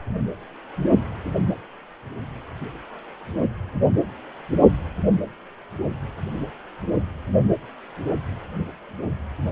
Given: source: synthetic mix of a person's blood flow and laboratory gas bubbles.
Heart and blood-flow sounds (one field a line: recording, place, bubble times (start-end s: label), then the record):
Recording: Doppler ultrasound of blood flow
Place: precordium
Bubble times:
no bubbles
From the record:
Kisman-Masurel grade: 000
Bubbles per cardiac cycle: 0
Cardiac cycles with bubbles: 0%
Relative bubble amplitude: no bubbles discernible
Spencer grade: 0 (complete lack of bubble signals)